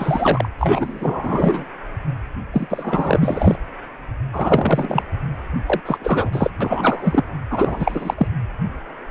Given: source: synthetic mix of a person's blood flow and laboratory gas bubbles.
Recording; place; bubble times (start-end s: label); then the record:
Doppler ultrasound of blood flow; precordium
0.00-0.49 s: bubbles
0.58-1.65 s: bubbles
2.53-3.55 s: bubbles
4.33-5.03 s: bubbles
5.66-5.80 s: bubbles
5.85-6.50 s: bubbles
6.61-7.24 s: bubbles
7.50-8.27 s: bubbles
From the record:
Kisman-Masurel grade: 333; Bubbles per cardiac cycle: rolling drumbeat, 9 or more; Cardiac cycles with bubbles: 50 to 99%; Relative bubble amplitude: loud (0.450 to 0.775); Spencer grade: 3 (all of the cardiac periods contain showers or single bubble signals, but not dominating or overriding the cardiac motion signals); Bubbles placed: anywhere in the cardiac cycle